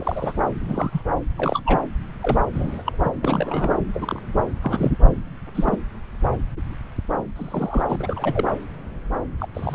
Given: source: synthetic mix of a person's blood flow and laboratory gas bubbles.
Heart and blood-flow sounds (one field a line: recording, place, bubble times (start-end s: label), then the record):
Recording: Doppler ultrasound of blood flow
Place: subclavian vein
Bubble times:
0.00-0.38 s: bubbles
0.60-1.02 s: bubbles
1.38-1.61 s: bubbles
1.65-1.80 s: bubbles
2.21-2.40 s: bubbles
2.53-2.82 s: bubbles
2.86-2.93 s: bubbles
3.04-3.12 s: bubbles
3.23-3.75 s: bubbles
3.94-4.22 s: bubbles
4.61-4.96 s: bubbles
5.09-5.14 s: bubbles
5.54-5.77 s: bubbles
7.35-7.96 s: bubbles
7.99-8.44 s: bubbles
9.40-9.48 s: bubbles
9.54-9.75 s: bubbles
From the record:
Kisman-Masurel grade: 232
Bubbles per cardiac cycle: several, 3 to 8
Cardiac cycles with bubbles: 50 to 99%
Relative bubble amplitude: moderate (0.250 to 0.450)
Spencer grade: 3 (all of the cardiac periods contain showers or single bubble signals, but not dominating or overriding the cardiac motion signals)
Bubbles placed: anywhere in the cardiac cycle